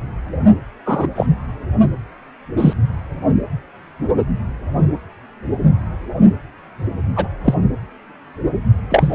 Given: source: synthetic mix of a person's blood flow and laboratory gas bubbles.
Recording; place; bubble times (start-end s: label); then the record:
Doppler ultrasound of blood flow; precordium
0.85-1.07 s: bubbles
1.15-1.27 s: bubbles
2.57-2.73 s: bubbles
7.16-7.27 s: bubbles
7.44-7.54 s: bubbles
8.90-9.13 s: bubbles
From the record:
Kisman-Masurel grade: 123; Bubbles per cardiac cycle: 1 to 2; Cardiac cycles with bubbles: 10 to 50%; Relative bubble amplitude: loud (0.450 to 0.775); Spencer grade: 2 (many but less than half of the cardiac periods contain bubble signals, singularly or in groups); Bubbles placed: anywhere in the cardiac cycle